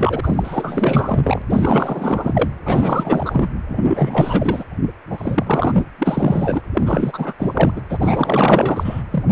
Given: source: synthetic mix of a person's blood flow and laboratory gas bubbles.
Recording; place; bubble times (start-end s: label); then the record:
Doppler ultrasound of blood flow; precordium
0.00-0.21 s: bubbles
0.23-1.42 s: bubbles
1.50-2.48 s: bubbles
2.65-3.48 s: bubbles
3.67-4.64 s: bubbles
5.09-5.85 s: bubbles
5.99-6.62 s: bubbles
6.73-7.34 s: bubbles
7.38-7.81 s: bubbles
7.89-9.02 s: bubbles
9.11-9.23 s: bubbles
9.29-9.32 s: bubbles
From the record:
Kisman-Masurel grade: 444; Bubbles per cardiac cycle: continuous sound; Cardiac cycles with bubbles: 100%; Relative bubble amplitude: maximal (0.775 to 0.999); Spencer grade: 4 (maximum detectable bubble signal sounding continuously throughout systole and diastole of every cardiac period, and overriding the amplitude of the normal cardiac signals); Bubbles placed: anywhere in the cardiac cycle